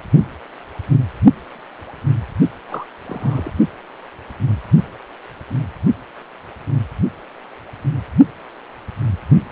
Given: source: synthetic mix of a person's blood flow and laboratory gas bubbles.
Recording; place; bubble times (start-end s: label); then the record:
Doppler ultrasound of blood flow; precordium
2.69-2.86 s: bubbles
3.07-3.53 s: bubbles
From the record:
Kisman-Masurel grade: 121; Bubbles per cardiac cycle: 1 to 2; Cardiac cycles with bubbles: 10 to 50%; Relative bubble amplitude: barely perceptible (0.100 to 0.250); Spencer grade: 2 (many but less than half of the cardiac periods contain bubble signals, singularly or in groups); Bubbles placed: only in the low amplitude regions of the cardiac cycle